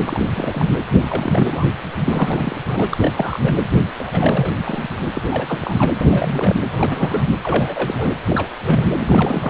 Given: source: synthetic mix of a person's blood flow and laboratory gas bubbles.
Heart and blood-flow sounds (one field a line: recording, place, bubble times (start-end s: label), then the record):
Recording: Doppler ultrasound of blood flow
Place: precordium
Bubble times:
0.07-0.29 s: bubbles
0.35-0.74 s: bubbles
0.91-1.65 s: bubbles
1.94-2.56 s: bubbles
2.68-2.87 s: bubbles
2.91-2.98 s: bubbles
3.00-3.14 s: bubbles
3.16-3.39 s: bubbles
3.44-3.54 s: bubbles
3.98-4.55 s: bubbles
4.65-4.86 s: bubbles
5.00-5.12 s: bubbles
5.15-5.21 s: bubbles
5.29-5.94 s: bubbles
6.00-6.55 s: bubbles
6.72-7.26 s: bubbles
7.43-8.10 s: bubbles
8.27-8.52 s: bubbles
8.64-8.87 s: bubbles
9.00-9.50 s: bubbles
From the record:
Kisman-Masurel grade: 332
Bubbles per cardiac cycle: rolling drumbeat, 9 or more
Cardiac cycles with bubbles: 50 to 99%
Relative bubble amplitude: moderate (0.250 to 0.450)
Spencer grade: 3 (all of the cardiac periods contain showers or single bubble signals, but not dominating or overriding the cardiac motion signals)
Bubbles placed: anywhere in the cardiac cycle